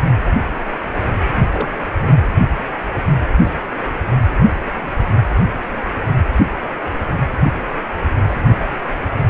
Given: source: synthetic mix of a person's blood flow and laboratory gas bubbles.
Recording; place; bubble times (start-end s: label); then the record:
Doppler ultrasound of blood flow; precordium
1.49-1.76 s: bubbles
1.92-2.25 s: bubbles
From the record:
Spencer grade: 1 (occasional bubble signal discernible with the cardiac motion signal, with majority of cardiac periods free of bubbles); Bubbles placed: anywhere in the cardiac cycle